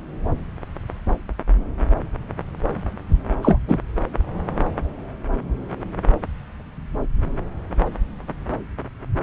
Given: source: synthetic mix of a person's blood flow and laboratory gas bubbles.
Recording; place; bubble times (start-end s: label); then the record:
Doppler ultrasound of blood flow; subclavian vein
3.42-3.58 s: bubbles
3.67-3.78 s: bubbles
From the record:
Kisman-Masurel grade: 213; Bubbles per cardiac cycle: several, 3 to 8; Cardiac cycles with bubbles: 1 to 10%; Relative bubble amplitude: loud (0.450 to 0.775); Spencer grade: 1 (occasional bubble signal discernible with the cardiac motion signal, with majority of cardiac periods free of bubbles); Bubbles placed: anywhere in the cardiac cycle